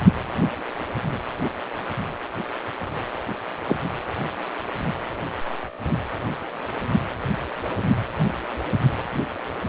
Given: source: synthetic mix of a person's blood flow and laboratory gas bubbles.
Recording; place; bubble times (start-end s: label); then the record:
Doppler ultrasound of blood flow; precordium
3.68-3.76 s: bubbles
From the record:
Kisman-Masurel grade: 113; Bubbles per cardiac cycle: 1 to 2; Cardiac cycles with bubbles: 1 to 10%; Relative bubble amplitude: loud (0.450 to 0.775); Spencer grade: 1 (occasional bubble signal discernible with the cardiac motion signal, with majority of cardiac periods free of bubbles); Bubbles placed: anywhere in the cardiac cycle